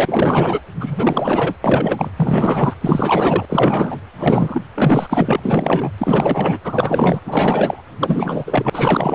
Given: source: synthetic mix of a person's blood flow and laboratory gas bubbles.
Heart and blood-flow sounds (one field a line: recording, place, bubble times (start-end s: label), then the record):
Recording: Doppler ultrasound of blood flow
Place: precordium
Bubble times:
0.00-0.61 s: bubbles
0.80-1.56 s: bubbles
1.64-2.09 s: bubbles
2.16-2.74 s: bubbles
2.81-3.46 s: bubbles
3.48-4.00 s: bubbles
4.18-4.64 s: bubbles
4.74-5.40 s: bubbles
5.42-5.91 s: bubbles
5.98-6.58 s: bubbles
6.64-7.20 s: bubbles
7.25-7.82 s: bubbles
7.99-9.15 s: bubbles
From the record:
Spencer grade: 4 (maximum detectable bubble signal sounding continuously throughout systole and diastole of every cardiac period, and overriding the amplitude of the normal cardiac signals)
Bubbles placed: anywhere in the cardiac cycle